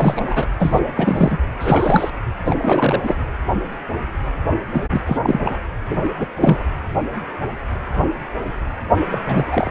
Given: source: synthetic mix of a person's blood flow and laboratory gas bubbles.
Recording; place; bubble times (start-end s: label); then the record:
Doppler ultrasound of blood flow; precordium
0.00-0.46 s: bubbles
0.59-0.80 s: bubbles
0.95-1.38 s: bubbles
1.60-2.10 s: bubbles
2.44-3.00 s: bubbles
3.03-3.15 s: bubbles
4.71-4.84 s: bubbles
4.89-5.01 s: bubbles
5.06-5.62 s: bubbles
5.86-6.00 s: bubbles
6.03-6.11 s: bubbles
6.17-6.27 s: bubbles
6.36-6.64 s: bubbles
9.09-9.19 s: bubbles
9.27-9.44 s: bubbles
9.51-9.71 s: bubbles
From the record:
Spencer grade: 3 (all of the cardiac periods contain showers or single bubble signals, but not dominating or overriding the cardiac motion signals); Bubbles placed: anywhere in the cardiac cycle